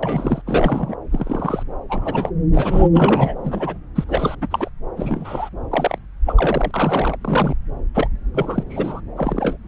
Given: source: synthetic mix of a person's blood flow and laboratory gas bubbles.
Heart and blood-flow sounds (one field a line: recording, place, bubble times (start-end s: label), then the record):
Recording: Doppler ultrasound of blood flow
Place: subclavian vein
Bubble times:
0.03-0.42 s: bubbles
0.45-0.95 s: bubbles
1.10-1.63 s: bubbles
1.89-2.31 s: bubbles
2.56-2.88 s: bubbles
2.93-3.35 s: bubbles
3.43-3.77 s: bubbles
3.95-4.04 s: bubbles
4.07-4.35 s: bubbles
4.41-4.47 s: bubbles
4.50-4.69 s: bubbles
4.96-5.49 s: bubbles
5.71-5.98 s: bubbles
6.26-6.71 s: bubbles
6.73-7.16 s: bubbles
7.21-7.56 s: bubbles
7.94-8.08 s: bubbles
8.34-8.63 s: bubbles
8.70-9.01 s: bubbles
9.17-9.57 s: bubbles
From the record:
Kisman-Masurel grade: 242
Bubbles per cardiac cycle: several, 3 to 8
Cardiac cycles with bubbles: 100%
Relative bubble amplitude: moderate (0.250 to 0.450)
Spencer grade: 3 (all of the cardiac periods contain showers or single bubble signals, but not dominating or overriding the cardiac motion signals)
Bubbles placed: anywhere in the cardiac cycle